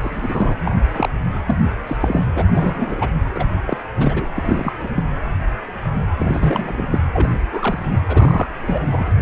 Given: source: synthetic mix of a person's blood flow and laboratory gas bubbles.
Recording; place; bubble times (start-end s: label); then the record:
Doppler ultrasound of blood flow; precordium
0.02-0.75 s: bubbles
0.94-1.10 s: bubbles
1.46-1.54 s: bubbles
1.87-1.97 s: bubbles
2.00-2.24 s: bubbles
2.34-2.44 s: bubbles
2.56-3.09 s: bubbles
3.34-3.46 s: bubbles
3.66-3.77 s: bubbles
3.97-4.27 s: bubbles
4.36-4.73 s: bubbles
4.81-4.91 s: bubbles
4.96-5.04 s: bubbles
6.17-6.86 s: bubbles
6.92-7.02 s: bubbles
7.13-7.31 s: bubbles
7.52-7.99 s: bubbles
8.08-8.47 s: bubbles
8.62-9.04 s: bubbles
9.08-9.10 s: bubbles
From the record:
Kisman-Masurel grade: 232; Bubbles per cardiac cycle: several, 3 to 8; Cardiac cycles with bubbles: 50 to 99%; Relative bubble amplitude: moderate (0.250 to 0.450); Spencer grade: 3 (all of the cardiac periods contain showers or single bubble signals, but not dominating or overriding the cardiac motion signals); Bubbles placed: anywhere in the cardiac cycle